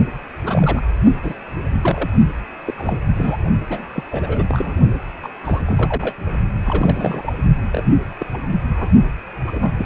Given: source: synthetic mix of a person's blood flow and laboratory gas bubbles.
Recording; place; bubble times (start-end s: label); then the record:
Doppler ultrasound of blood flow; precordium
0.45-0.82 s: bubbles
1.23-1.35 s: bubbles
1.82-2.10 s: bubbles
2.67-2.74 s: bubbles
2.77-2.98 s: bubbles
3.14-3.37 s: bubbles
3.69-3.89 s: bubbles
3.94-4.03 s: bubbles
4.11-4.44 s: bubbles
4.48-4.74 s: bubbles
5.22-5.29 s: bubbles
5.44-5.61 s: bubbles
5.66-6.13 s: bubbles
6.64-7.32 s: bubbles
7.71-7.86 s: bubbles
8.20-8.26 s: bubbles
8.33-8.38 s: bubbles
8.72-8.89 s: bubbles
9.47-9.85 s: bubbles
From the record:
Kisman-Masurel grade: 242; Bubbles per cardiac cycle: several, 3 to 8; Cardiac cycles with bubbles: 100%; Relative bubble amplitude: moderate (0.250 to 0.450); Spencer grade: 3 (all of the cardiac periods contain showers or single bubble signals, but not dominating or overriding the cardiac motion signals); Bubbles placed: only in the low amplitude regions of the cardiac cycle